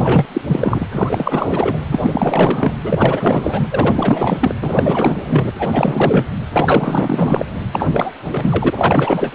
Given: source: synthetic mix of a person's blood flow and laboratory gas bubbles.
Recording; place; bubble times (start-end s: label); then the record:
Doppler ultrasound of blood flow; precordium
0.00-0.26 s: bubbles
0.33-0.41 s: bubbles
0.47-0.86 s: bubbles
0.91-1.77 s: bubbles
1.86-2.72 s: bubbles
2.84-3.67 s: bubbles
3.71-4.38 s: bubbles
4.41-4.55 s: bubbles
4.62-5.45 s: bubbles
5.58-6.25 s: bubbles
6.53-7.46 s: bubbles
7.72-7.89 s: bubbles
7.92-8.12 s: bubbles
8.31-8.71 s: bubbles
8.76-9.35 s: bubbles
From the record:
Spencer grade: 4 (maximum detectable bubble signal sounding continuously throughout systole and diastole of every cardiac period, and overriding the amplitude of the normal cardiac signals); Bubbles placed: anywhere in the cardiac cycle